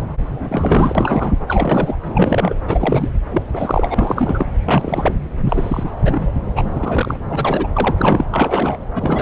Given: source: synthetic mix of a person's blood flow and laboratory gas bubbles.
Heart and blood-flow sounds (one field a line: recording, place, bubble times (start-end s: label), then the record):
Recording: Doppler ultrasound of blood flow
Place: subclavian vein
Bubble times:
0.28-1.34 s: bubbles
1.48-1.97 s: bubbles
2.04-2.55 s: bubbles
2.67-3.09 s: bubbles
3.31-3.42 s: bubbles
3.53-4.46 s: bubbles
4.66-5.23 s: bubbles
5.44-5.91 s: bubbles
6.04-6.31 s: bubbles
6.55-7.18 s: bubbles
7.29-7.68 s: bubbles
7.73-8.24 s: bubbles
8.31-8.77 s: bubbles
8.95-9.22 s: bubbles
From the record:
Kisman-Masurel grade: 343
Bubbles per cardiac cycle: rolling drumbeat, 9 or more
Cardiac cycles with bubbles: 100%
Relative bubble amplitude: loud (0.450 to 0.775)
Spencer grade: 3 (all of the cardiac periods contain showers or single bubble signals, but not dominating or overriding the cardiac motion signals)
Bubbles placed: anywhere in the cardiac cycle